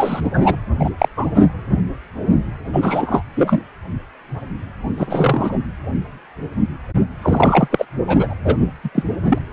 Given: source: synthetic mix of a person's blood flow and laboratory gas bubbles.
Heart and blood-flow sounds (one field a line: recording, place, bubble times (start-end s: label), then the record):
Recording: Doppler ultrasound of blood flow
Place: precordium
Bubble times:
0.00-0.30 s: bubbles
0.33-0.56 s: bubbles
0.79-0.90 s: bubbles
0.98-1.08 s: bubbles
1.16-1.26 s: bubbles
1.34-1.47 s: bubbles
2.73-3.23 s: bubbles
3.35-3.60 s: bubbles
4.98-5.58 s: bubbles
7.21-7.86 s: bubbles
8.07-8.34 s: bubbles
8.45-8.55 s: bubbles
8.84-8.89 s: bubbles
8.94-9.04 s: bubbles
9.29-9.38 s: bubbles
From the record:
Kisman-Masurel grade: 233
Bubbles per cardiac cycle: several, 3 to 8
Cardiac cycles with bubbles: 50 to 99%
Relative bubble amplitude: loud (0.450 to 0.775)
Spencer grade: 3 (all of the cardiac periods contain showers or single bubble signals, but not dominating or overriding the cardiac motion signals)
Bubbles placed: anywhere in the cardiac cycle